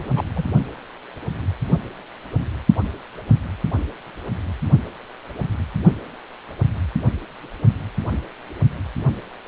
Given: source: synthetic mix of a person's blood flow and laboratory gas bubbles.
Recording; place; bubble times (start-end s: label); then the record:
Doppler ultrasound of blood flow; precordium
0.00-0.24 s: bubbles
0.35-0.45 s: bubbles
From the record:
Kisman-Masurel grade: 211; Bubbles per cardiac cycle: several, 3 to 8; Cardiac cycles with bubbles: 1 to 10%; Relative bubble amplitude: barely perceptible (0.100 to 0.250); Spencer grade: 1 (occasional bubble signal discernible with the cardiac motion signal, with majority of cardiac periods free of bubbles); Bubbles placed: only in the low amplitude regions of the cardiac cycle